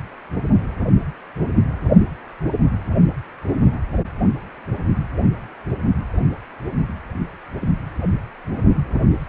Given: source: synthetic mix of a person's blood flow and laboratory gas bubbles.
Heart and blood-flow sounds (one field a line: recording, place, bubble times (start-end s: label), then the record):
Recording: Doppler ultrasound of blood flow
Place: precordium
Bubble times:
7.62-7.68 s: bubbles
From the record:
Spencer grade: 2 (many but less than half of the cardiac periods contain bubble signals, singularly or in groups)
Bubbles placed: anywhere in the cardiac cycle